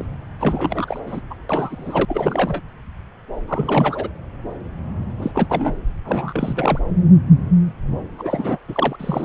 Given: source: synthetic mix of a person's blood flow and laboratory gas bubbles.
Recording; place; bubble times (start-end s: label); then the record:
Doppler ultrasound of blood flow; subclavian vein
0.00-0.06 s: bubbles
0.40-1.00 s: bubbles
1.06-1.21 s: bubbles
1.30-1.34 s: bubbles
1.49-2.05 s: bubbles
2.08-2.62 s: bubbles
3.48-4.09 s: bubbles
5.19-5.31 s: bubbles
5.34-5.46 s: bubbles
5.49-5.76 s: bubbles
6.04-6.79 s: bubbles
8.18-8.58 s: bubbles
8.68-8.96 s: bubbles
8.99-9.25 s: bubbles
From the record:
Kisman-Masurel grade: 332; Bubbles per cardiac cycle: rolling drumbeat, 9 or more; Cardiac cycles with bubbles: 50 to 99%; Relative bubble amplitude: moderate (0.250 to 0.450); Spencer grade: 3 (all of the cardiac periods contain showers or single bubble signals, but not dominating or overriding the cardiac motion signals); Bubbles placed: anywhere in the cardiac cycle